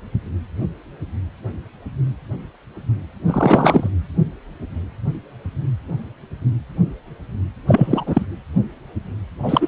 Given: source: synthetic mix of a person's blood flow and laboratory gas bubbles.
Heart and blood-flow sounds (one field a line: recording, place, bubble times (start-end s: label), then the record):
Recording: Doppler ultrasound of blood flow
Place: precordium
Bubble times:
3.26-3.89 s: bubbles
7.67-8.25 s: bubbles
9.42-9.67 s: bubbles
From the record:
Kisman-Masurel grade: 223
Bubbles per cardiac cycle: several, 3 to 8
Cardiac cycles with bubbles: 10 to 50%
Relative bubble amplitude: loud (0.450 to 0.775)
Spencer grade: 2 (many but less than half of the cardiac periods contain bubble signals, singularly or in groups)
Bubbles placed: anywhere in the cardiac cycle